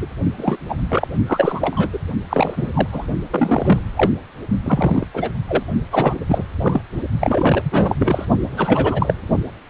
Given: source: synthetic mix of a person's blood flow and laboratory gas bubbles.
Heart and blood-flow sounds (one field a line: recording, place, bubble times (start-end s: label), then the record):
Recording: Doppler ultrasound of blood flow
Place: precordium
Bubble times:
0.00-0.06 s: bubbles
0.37-0.57 s: bubbles
0.69-0.77 s: bubbles
0.89-1.08 s: bubbles
1.26-1.90 s: bubbles
1.93-1.98 s: bubbles
2.29-2.71 s: bubbles
2.73-2.88 s: bubbles
2.92-3.06 s: bubbles
3.30-3.83 s: bubbles
3.96-4.10 s: bubbles
4.65-5.05 s: bubbles
5.13-5.30 s: bubbles
5.48-5.63 s: bubbles
5.92-6.14 s: bubbles
6.28-6.44 s: bubbles
6.60-6.82 s: bubbles
7.20-7.62 s: bubbles
7.71-7.95 s: bubbles
7.98-8.25 s: bubbles
8.56-9.14 s: bubbles
From the record:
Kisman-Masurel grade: 243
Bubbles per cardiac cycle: several, 3 to 8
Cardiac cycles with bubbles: 100%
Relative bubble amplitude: loud (0.450 to 0.775)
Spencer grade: 3 (all of the cardiac periods contain showers or single bubble signals, but not dominating or overriding the cardiac motion signals)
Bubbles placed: only in the low amplitude regions of the cardiac cycle